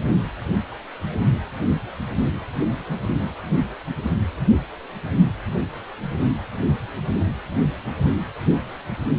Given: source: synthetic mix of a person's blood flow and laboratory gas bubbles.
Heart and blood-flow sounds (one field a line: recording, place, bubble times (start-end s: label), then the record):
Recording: Doppler ultrasound of blood flow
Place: precordium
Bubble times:
no bubbles
From the record:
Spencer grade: 0 (complete lack of bubble signals)